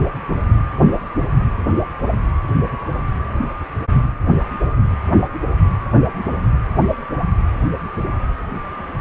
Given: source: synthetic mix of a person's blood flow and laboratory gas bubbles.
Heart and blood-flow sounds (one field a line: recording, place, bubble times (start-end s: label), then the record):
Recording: Doppler ultrasound of blood flow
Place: precordium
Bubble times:
no bubbles
From the record:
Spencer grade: 0 (complete lack of bubble signals)